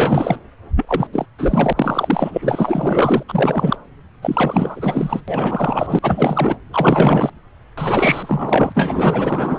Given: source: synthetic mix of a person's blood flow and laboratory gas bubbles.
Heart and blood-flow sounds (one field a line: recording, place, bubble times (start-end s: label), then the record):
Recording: Doppler ultrasound of blood flow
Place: subclavian vein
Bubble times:
0.00-0.38 s: bubbles
0.76-1.07 s: bubbles
1.12-1.26 s: bubbles
1.38-1.73 s: bubbles
1.76-3.23 s: bubbles
3.28-3.76 s: bubbles
4.21-5.21 s: bubbles
5.28-5.99 s: bubbles
6.02-6.57 s: bubbles
6.73-7.30 s: bubbles
7.77-9.59 s: bubbles
From the record:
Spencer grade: 4 (maximum detectable bubble signal sounding continuously throughout systole and diastole of every cardiac period, and overriding the amplitude of the normal cardiac signals)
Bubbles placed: anywhere in the cardiac cycle